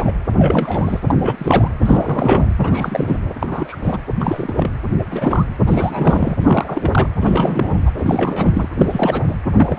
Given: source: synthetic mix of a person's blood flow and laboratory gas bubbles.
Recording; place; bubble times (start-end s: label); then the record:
Doppler ultrasound of blood flow; precordium
0.00-0.12 s: bubbles
0.31-1.00 s: bubbles
1.07-1.15 s: bubbles
1.20-1.69 s: bubbles
1.81-2.46 s: bubbles
2.56-3.16 s: bubbles
3.41-3.75 s: bubbles
3.82-3.99 s: bubbles
4.20-4.79 s: bubbles
4.99-5.05 s: bubbles
5.11-5.46 s: bubbles
5.67-6.37 s: bubbles
6.41-7.11 s: bubbles
7.21-7.81 s: bubbles
7.86-7.92 s: bubbles
7.97-8.69 s: bubbles
8.78-9.36 s: bubbles
9.56-9.78 s: bubbles
From the record:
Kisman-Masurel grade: 342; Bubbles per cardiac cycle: rolling drumbeat, 9 or more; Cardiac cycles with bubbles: 100%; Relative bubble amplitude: moderate (0.250 to 0.450); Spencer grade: 3 (all of the cardiac periods contain showers or single bubble signals, but not dominating or overriding the cardiac motion signals); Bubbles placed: anywhere in the cardiac cycle